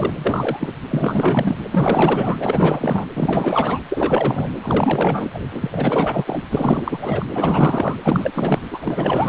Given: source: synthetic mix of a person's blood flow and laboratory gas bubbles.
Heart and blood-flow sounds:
Doppler ultrasound of blood flow; precordium
0.00-0.73 s: bubbles
0.90-1.58 s: bubbles
1.71-3.06 s: bubbles
3.15-3.79 s: bubbles
3.89-4.50 s: bubbles
4.62-5.39 s: bubbles
5.50-6.44 s: bubbles
6.50-7.25 s: bubbles
7.32-7.96 s: bubbles
8.04-8.61 s: bubbles
8.71-9.29 s: bubbles
From the record:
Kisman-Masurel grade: 444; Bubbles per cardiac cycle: continuous sound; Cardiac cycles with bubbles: 100%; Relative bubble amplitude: maximal (0.775 to 0.999); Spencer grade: 4 (maximum detectable bubble signal sounding continuously throughout systole and diastole of every cardiac period, and overriding the amplitude of the normal cardiac signals); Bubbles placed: anywhere in the cardiac cycle

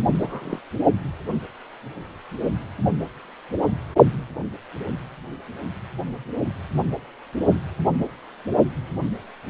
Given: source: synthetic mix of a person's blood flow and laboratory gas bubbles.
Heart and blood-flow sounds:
Doppler ultrasound of blood flow; precordium
0.14-0.59 s: bubbles
From the record:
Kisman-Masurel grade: 221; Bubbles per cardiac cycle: several, 3 to 8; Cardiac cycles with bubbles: 10 to 50%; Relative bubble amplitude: barely perceptible (0.100 to 0.250); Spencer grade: 2 (many but less than half of the cardiac periods contain bubble signals, singularly or in groups); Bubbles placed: only in the low amplitude regions of the cardiac cycle

